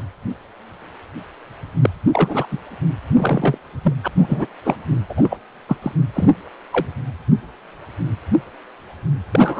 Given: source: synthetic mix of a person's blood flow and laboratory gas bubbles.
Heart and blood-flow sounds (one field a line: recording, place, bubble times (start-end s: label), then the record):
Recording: Doppler ultrasound of blood flow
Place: precordium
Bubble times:
1.81-1.90 s: bubbles
2.13-2.46 s: bubbles
2.51-2.58 s: bubbles
3.17-3.58 s: bubbles
3.83-3.93 s: bubbles
4.04-4.08 s: bubbles
4.17-4.46 s: bubbles
4.65-4.76 s: bubbles
5.09-5.14 s: bubbles
5.17-5.37 s: bubbles
5.68-5.77 s: bubbles
5.82-5.92 s: bubbles
6.13-6.28 s: bubbles
6.72-6.86 s: bubbles
9.31-9.60 s: bubbles
From the record:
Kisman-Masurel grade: 232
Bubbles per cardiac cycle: several, 3 to 8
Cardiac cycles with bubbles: 50 to 99%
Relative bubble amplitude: moderate (0.250 to 0.450)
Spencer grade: 3 (all of the cardiac periods contain showers or single bubble signals, but not dominating or overriding the cardiac motion signals)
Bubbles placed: anywhere in the cardiac cycle